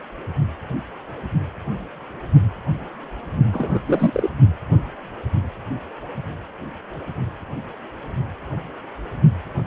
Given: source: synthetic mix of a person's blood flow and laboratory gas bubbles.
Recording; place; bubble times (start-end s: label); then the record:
Doppler ultrasound of blood flow; precordium
3.52-3.79 s: bubbles
3.87-4.30 s: bubbles
From the record:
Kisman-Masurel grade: 212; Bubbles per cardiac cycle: several, 3 to 8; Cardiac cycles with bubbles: 1 to 10%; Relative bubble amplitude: moderate (0.250 to 0.450); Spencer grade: 1 (occasional bubble signal discernible with the cardiac motion signal, with majority of cardiac periods free of bubbles); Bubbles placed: only in the low amplitude regions of the cardiac cycle